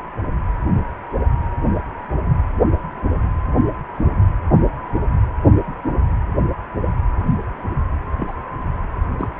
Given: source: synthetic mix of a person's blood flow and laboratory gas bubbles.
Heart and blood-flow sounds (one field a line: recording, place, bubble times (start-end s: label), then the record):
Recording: Doppler ultrasound of blood flow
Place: precordium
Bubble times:
8.17-8.33 s: bubbles
9.17-9.28 s: bubbles
From the record:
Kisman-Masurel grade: 122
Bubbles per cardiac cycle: 1 to 2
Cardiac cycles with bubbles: 10 to 50%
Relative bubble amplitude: moderate (0.250 to 0.450)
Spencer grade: 2 (many but less than half of the cardiac periods contain bubble signals, singularly or in groups)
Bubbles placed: anywhere in the cardiac cycle